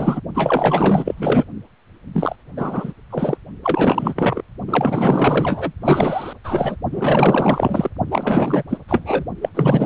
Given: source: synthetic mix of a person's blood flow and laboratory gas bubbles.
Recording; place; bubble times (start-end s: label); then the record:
Doppler ultrasound of blood flow; precordium
0.00-0.21 s: bubbles
0.34-1.14 s: bubbles
1.17-1.44 s: bubbles
2.13-2.36 s: bubbles
2.56-2.92 s: bubbles
3.10-3.38 s: bubbles
3.62-4.42 s: bubbles
4.67-5.72 s: bubbles
5.80-6.33 s: bubbles
6.44-6.76 s: bubbles
6.92-7.90 s: bubbles
8.11-8.63 s: bubbles
8.69-8.78 s: bubbles
8.88-9.24 s: bubbles
9.42-9.49 s: bubbles
9.54-9.86 s: bubbles
From the record:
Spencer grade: 4 (maximum detectable bubble signal sounding continuously throughout systole and diastole of every cardiac period, and overriding the amplitude of the normal cardiac signals); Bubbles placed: only in the low amplitude regions of the cardiac cycle